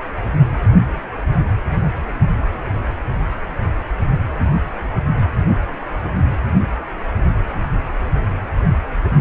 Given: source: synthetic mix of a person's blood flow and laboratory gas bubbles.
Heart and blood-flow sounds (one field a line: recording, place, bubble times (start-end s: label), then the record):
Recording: Doppler ultrasound of blood flow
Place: precordium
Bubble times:
no bubbles
From the record:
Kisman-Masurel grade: 000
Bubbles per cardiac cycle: 0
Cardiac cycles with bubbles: 0%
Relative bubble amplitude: no bubbles discernible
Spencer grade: 0 (complete lack of bubble signals)